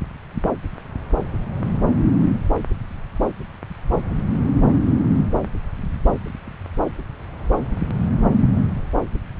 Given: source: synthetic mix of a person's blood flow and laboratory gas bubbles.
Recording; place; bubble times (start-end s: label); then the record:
Doppler ultrasound of blood flow; subclavian vein
no bubbles
From the record:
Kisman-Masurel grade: 000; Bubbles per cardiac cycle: 0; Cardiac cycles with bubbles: 0%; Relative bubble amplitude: no bubbles discernible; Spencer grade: 0 (complete lack of bubble signals)